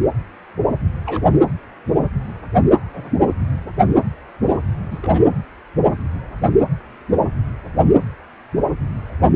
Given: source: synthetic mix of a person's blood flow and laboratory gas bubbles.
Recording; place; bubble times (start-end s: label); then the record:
Doppler ultrasound of blood flow; precordium
1.05-1.23 s: bubbles
2.93-3.11 s: bubbles
3.28-3.34 s: bubbles
4.91-4.98 s: bubbles
5.02-5.23 s: bubbles
From the record:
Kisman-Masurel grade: 121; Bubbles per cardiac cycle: 1 to 2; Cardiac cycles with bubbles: 10 to 50%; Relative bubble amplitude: barely perceptible (0.100 to 0.250); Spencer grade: 2 (many but less than half of the cardiac periods contain bubble signals, singularly or in groups); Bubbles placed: anywhere in the cardiac cycle